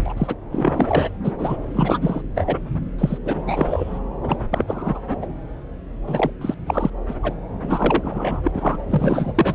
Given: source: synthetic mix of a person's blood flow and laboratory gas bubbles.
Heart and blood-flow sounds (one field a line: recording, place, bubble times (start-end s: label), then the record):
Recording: Doppler ultrasound of blood flow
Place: subclavian vein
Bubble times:
0.00-0.14 s: bubbles
0.16-0.35 s: bubbles
0.52-1.09 s: bubbles
1.23-1.32 s: bubbles
1.38-1.57 s: bubbles
1.73-2.24 s: bubbles
2.35-2.60 s: bubbles
2.98-3.18 s: bubbles
3.25-3.35 s: bubbles
3.46-4.00 s: bubbles
4.24-4.36 s: bubbles
4.53-4.63 s: bubbles
4.67-5.00 s: bubbles
5.10-5.17 s: bubbles
5.21-5.27 s: bubbles
6.07-6.31 s: bubbles
6.41-6.54 s: bubbles
6.67-6.90 s: bubbles
7.08-7.15 s: bubbles
7.23-7.33 s: bubbles
7.62-8.41 s: bubbles
8.44-8.78 s: bubbles
8.88-9.32 s: bubbles
9.35-9.55 s: bubbles
From the record:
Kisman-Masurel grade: 342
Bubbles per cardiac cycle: rolling drumbeat, 9 or more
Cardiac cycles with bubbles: 100%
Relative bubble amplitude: moderate (0.250 to 0.450)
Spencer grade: 3 (all of the cardiac periods contain showers or single bubble signals, but not dominating or overriding the cardiac motion signals)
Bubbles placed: anywhere in the cardiac cycle